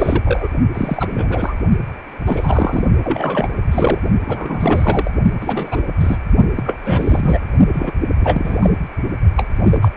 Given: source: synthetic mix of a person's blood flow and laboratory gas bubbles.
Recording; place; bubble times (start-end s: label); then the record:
Doppler ultrasound of blood flow; precordium
0.00-0.48 s: bubbles
0.73-1.57 s: bubbles
2.25-2.83 s: bubbles
3.03-3.48 s: bubbles
3.71-3.98 s: bubbles
4.26-5.11 s: bubbles
5.41-5.83 s: bubbles
6.00-6.18 s: bubbles
6.57-6.78 s: bubbles
6.83-7.40 s: bubbles
7.73-7.92 s: bubbles
8.20-8.75 s: bubbles
9.37-9.46 s: bubbles
9.63-9.79 s: bubbles
9.81-9.89 s: bubbles
From the record:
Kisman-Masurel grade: 333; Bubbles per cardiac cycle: rolling drumbeat, 9 or more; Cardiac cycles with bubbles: 50 to 99%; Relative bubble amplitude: loud (0.450 to 0.775); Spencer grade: 3 (all of the cardiac periods contain showers or single bubble signals, but not dominating or overriding the cardiac motion signals); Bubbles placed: only in the low amplitude regions of the cardiac cycle